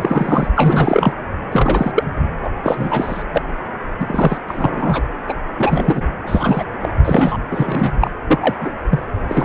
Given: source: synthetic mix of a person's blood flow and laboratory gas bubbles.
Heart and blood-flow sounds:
Doppler ultrasound of blood flow; precordium
0.00-0.49 s: bubbles
0.55-1.12 s: bubbles
1.52-1.92 s: bubbles
1.95-2.03 s: bubbles
2.42-2.49 s: bubbles
2.63-3.22 s: bubbles
3.33-3.42 s: bubbles
4.00-4.38 s: bubbles
4.47-5.02 s: bubbles
5.28-5.33 s: bubbles
5.58-6.01 s: bubbles
6.26-6.63 s: bubbles
6.83-6.89 s: bubbles
7.04-7.37 s: bubbles
7.51-7.93 s: bubbles
8.01-8.11 s: bubbles
8.27-8.55 s: bubbles
8.61-8.71 s: bubbles
8.90-9.04 s: bubbles
9.28-9.45 s: bubbles
From the record:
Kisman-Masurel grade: 343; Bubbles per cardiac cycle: rolling drumbeat, 9 or more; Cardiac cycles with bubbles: 100%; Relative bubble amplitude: loud (0.450 to 0.775); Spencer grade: 3 (all of the cardiac periods contain showers or single bubble signals, but not dominating or overriding the cardiac motion signals); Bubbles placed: anywhere in the cardiac cycle

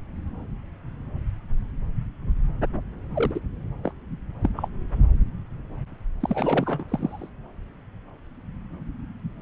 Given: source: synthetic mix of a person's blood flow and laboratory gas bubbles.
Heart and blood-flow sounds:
Doppler ultrasound of blood flow; subclavian vein
3.15-3.40 s: bubbles
3.83-3.93 s: bubbles
4.42-4.49 s: bubbles
4.56-4.68 s: bubbles
6.20-6.84 s: bubbles
6.88-7.29 s: bubbles
From the record:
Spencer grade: 2 (many but less than half of the cardiac periods contain bubble signals, singularly or in groups); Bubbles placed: anywhere in the cardiac cycle

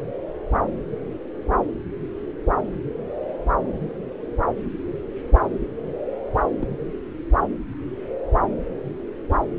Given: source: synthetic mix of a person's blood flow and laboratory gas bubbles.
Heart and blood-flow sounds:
Doppler ultrasound of blood flow; subclavian vein
6.33-6.41 s: bubbles
6.59-6.67 s: bubbles
From the record:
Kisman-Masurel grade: 121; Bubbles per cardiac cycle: 1 to 2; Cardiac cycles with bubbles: 10 to 50%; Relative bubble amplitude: barely perceptible (0.100 to 0.250); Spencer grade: 2 (many but less than half of the cardiac periods contain bubble signals, singularly or in groups); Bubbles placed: anywhere in the cardiac cycle

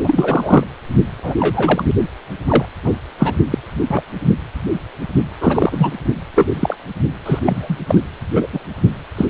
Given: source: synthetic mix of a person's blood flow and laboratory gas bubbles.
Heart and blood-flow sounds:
Doppler ultrasound of blood flow; precordium
0.03-0.64 s: bubbles
1.23-1.35 s: bubbles
1.39-1.84 s: bubbles
2.47-2.65 s: bubbles
2.82-2.95 s: bubbles
3.18-3.33 s: bubbles
3.50-3.58 s: bubbles
3.90-4.02 s: bubbles
5.41-5.92 s: bubbles
6.35-6.47 s: bubbles
6.54-6.76 s: bubbles
7.25-7.39 s: bubbles
7.46-7.76 s: bubbles
7.87-7.99 s: bubbles
8.35-8.47 s: bubbles
8.53-8.60 s: bubbles
9.17-9.26 s: bubbles
From the record:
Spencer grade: 3 (all of the cardiac periods contain showers or single bubble signals, but not dominating or overriding the cardiac motion signals); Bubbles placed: anywhere in the cardiac cycle

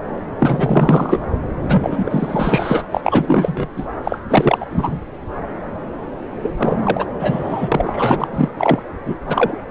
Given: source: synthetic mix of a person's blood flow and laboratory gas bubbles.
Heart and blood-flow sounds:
Doppler ultrasound of blood flow; subclavian vein
0.39-1.24 s: bubbles
1.59-2.83 s: bubbles
2.91-3.00 s: bubbles
3.04-3.67 s: bubbles
3.77-3.85 s: bubbles
4.04-4.18 s: bubbles
4.30-4.66 s: bubbles
4.71-5.01 s: bubbles
6.42-6.50 s: bubbles
6.57-7.05 s: bubbles
7.19-7.69 s: bubbles
7.71-8.28 s: bubbles
8.33-8.49 s: bubbles
8.57-8.82 s: bubbles
9.05-9.16 s: bubbles
9.25-9.57 s: bubbles
From the record:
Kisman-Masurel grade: 333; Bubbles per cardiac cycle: rolling drumbeat, 9 or more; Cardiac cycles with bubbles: 50 to 99%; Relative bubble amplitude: loud (0.450 to 0.775); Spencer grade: 3 (all of the cardiac periods contain showers or single bubble signals, but not dominating or overriding the cardiac motion signals); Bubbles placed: anywhere in the cardiac cycle

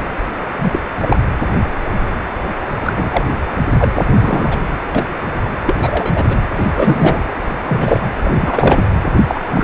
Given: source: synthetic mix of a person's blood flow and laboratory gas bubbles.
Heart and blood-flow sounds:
Doppler ultrasound of blood flow; precordium
0.58-0.79 s: bubbles
1.02-1.19 s: bubbles
2.83-3.23 s: bubbles
3.79-3.92 s: bubbles
3.95-4.04 s: bubbles
4.18-4.58 s: bubbles
4.95-5.04 s: bubbles
5.67-6.25 s: bubbles
6.29-6.35 s: bubbles
6.55-7.22 s: bubbles
7.67-8.13 s: bubbles
8.24-8.84 s: bubbles
9.28-9.43 s: bubbles
9.52-9.64 s: bubbles
From the record:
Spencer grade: 3 (all of the cardiac periods contain showers or single bubble signals, but not dominating or overriding the cardiac motion signals); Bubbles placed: anywhere in the cardiac cycle

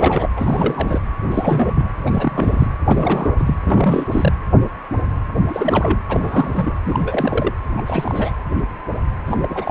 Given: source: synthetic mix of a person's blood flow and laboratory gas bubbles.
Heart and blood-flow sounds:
Doppler ultrasound of blood flow; precordium
0.00-0.29 s: bubbles
0.36-0.98 s: bubbles
1.31-1.93 s: bubbles
2.06-2.69 s: bubbles
2.84-3.34 s: bubbles
3.37-3.55 s: bubbles
3.63-4.06 s: bubbles
4.12-4.32 s: bubbles
5.49-5.98 s: bubbles
6.08-6.75 s: bubbles
6.84-7.52 s: bubbles
7.76-7.83 s: bubbles
7.86-8.35 s: bubbles
9.26-9.37 s: bubbles
9.41-9.71 s: bubbles
From the record:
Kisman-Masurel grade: 332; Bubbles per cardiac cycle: rolling drumbeat, 9 or more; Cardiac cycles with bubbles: 50 to 99%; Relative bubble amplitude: moderate (0.250 to 0.450); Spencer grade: 3 (all of the cardiac periods contain showers or single bubble signals, but not dominating or overriding the cardiac motion signals); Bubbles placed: anywhere in the cardiac cycle

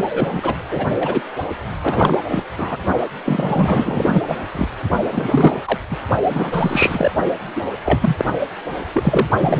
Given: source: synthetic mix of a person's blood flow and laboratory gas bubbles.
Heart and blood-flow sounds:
Doppler ultrasound of blood flow; precordium
0.09-0.56 s: bubbles
0.70-1.23 s: bubbles
1.83-2.17 s: bubbles
2.29-2.43 s: bubbles
2.58-2.77 s: bubbles
3.24-4.21 s: bubbles
4.27-4.36 s: bubbles
4.54-4.68 s: bubbles
5.12-5.62 s: bubbles
5.66-5.79 s: bubbles
5.91-5.96 s: bubbles
6.28-7.12 s: bubbles
7.56-7.62 s: bubbles
7.85-8.25 s: bubbles
8.94-9.28 s: bubbles
9.40-9.60 s: bubbles
From the record:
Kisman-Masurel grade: 333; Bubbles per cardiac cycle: rolling drumbeat, 9 or more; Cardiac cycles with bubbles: 50 to 99%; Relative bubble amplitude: loud (0.450 to 0.775); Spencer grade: 3 (all of the cardiac periods contain showers or single bubble signals, but not dominating or overriding the cardiac motion signals); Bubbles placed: only in the low amplitude regions of the cardiac cycle

